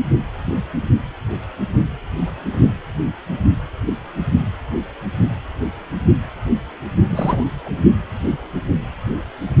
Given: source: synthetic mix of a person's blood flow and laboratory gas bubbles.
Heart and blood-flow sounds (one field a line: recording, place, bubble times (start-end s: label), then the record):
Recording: Doppler ultrasound of blood flow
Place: precordium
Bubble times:
7.09-7.43 s: bubbles
7.65-7.70 s: bubbles
From the record:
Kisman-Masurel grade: 212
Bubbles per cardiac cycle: several, 3 to 8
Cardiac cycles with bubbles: 1 to 10%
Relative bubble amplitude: moderate (0.250 to 0.450)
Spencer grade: 1 (occasional bubble signal discernible with the cardiac motion signal, with majority of cardiac periods free of bubbles)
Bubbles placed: only in the low amplitude regions of the cardiac cycle